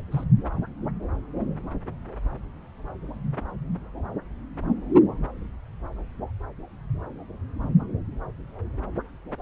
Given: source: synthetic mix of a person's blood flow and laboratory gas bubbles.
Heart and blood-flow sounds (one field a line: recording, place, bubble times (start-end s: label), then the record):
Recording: Doppler ultrasound of blood flow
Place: subclavian vein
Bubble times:
0.11-0.23 s: bubbles
From the record:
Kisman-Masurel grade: 111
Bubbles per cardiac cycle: 1 to 2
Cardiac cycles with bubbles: 1 to 10%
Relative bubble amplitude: barely perceptible (0.100 to 0.250)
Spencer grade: 1 (occasional bubble signal discernible with the cardiac motion signal, with majority of cardiac periods free of bubbles)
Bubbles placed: anywhere in the cardiac cycle